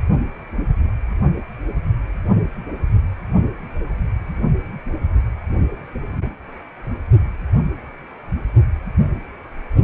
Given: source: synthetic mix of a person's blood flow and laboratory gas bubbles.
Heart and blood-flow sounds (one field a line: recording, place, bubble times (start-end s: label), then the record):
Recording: Doppler ultrasound of blood flow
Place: precordium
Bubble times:
no bubbles
From the record:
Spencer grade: 0 (complete lack of bubble signals)